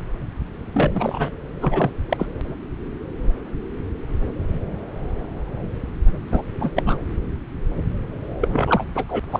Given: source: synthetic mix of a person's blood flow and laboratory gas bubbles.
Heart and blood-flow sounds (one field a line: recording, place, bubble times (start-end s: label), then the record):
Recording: Doppler ultrasound of blood flow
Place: subclavian vein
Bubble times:
0.73-1.31 s: bubbles
1.61-1.91 s: bubbles
2.09-2.26 s: bubbles
6.31-6.42 s: bubbles
6.60-6.71 s: bubbles
6.75-6.98 s: bubbles
8.41-8.48 s: bubbles
8.52-8.84 s: bubbles
8.95-9.04 s: bubbles
9.08-9.20 s: bubbles
9.32-9.40 s: bubbles
From the record:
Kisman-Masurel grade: 232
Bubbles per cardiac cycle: several, 3 to 8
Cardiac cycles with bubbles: 50 to 99%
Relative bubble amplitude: moderate (0.250 to 0.450)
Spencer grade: 3 (all of the cardiac periods contain showers or single bubble signals, but not dominating or overriding the cardiac motion signals)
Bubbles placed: anywhere in the cardiac cycle